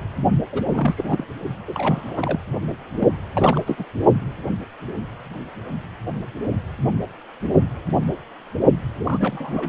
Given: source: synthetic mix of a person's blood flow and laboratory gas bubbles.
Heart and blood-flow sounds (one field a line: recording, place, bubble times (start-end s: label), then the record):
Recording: Doppler ultrasound of blood flow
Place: precordium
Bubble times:
0.52-0.62 s: bubbles
0.73-1.23 s: bubbles
1.67-2.39 s: bubbles
2.99-3.08 s: bubbles
3.34-3.59 s: bubbles
3.67-3.85 s: bubbles
9.00-9.69 s: bubbles
From the record:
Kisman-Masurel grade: 332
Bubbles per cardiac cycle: rolling drumbeat, 9 or more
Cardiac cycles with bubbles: 50 to 99%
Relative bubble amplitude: moderate (0.250 to 0.450)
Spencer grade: 3 (all of the cardiac periods contain showers or single bubble signals, but not dominating or overriding the cardiac motion signals)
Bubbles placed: only in the low amplitude regions of the cardiac cycle